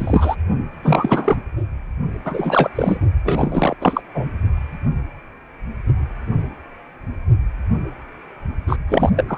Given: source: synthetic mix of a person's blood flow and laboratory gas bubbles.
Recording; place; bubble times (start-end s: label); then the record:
Doppler ultrasound of blood flow; precordium
0.00-0.36 s: bubbles
0.83-1.36 s: bubbles
2.25-2.70 s: bubbles
2.75-2.98 s: bubbles
3.24-3.74 s: bubbles
3.80-4.01 s: bubbles
4.14-4.28 s: bubbles
8.67-8.77 s: bubbles
8.88-9.11 s: bubbles
9.16-9.24 s: bubbles
9.27-9.38 s: bubbles
From the record:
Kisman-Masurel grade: 333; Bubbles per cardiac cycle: rolling drumbeat, 9 or more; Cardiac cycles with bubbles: 50 to 99%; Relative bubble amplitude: loud (0.450 to 0.775); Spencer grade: 3 (all of the cardiac periods contain showers or single bubble signals, but not dominating or overriding the cardiac motion signals); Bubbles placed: only in the low amplitude regions of the cardiac cycle